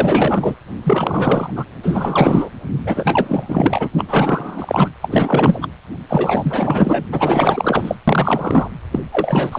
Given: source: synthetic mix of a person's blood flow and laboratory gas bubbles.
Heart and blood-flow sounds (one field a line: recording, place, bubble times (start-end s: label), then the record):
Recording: Doppler ultrasound of blood flow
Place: precordium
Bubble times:
0.00-0.55 s: bubbles
0.84-1.51 s: bubbles
1.55-1.65 s: bubbles
1.82-2.50 s: bubbles
2.85-3.90 s: bubbles
3.97-4.05 s: bubbles
4.08-4.89 s: bubbles
5.01-5.68 s: bubbles
6.08-7.05 s: bubbles
7.12-7.95 s: bubbles
8.08-8.68 s: bubbles
8.92-9.00 s: bubbles
9.12-9.59 s: bubbles
From the record:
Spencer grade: 4 (maximum detectable bubble signal sounding continuously throughout systole and diastole of every cardiac period, and overriding the amplitude of the normal cardiac signals)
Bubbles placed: anywhere in the cardiac cycle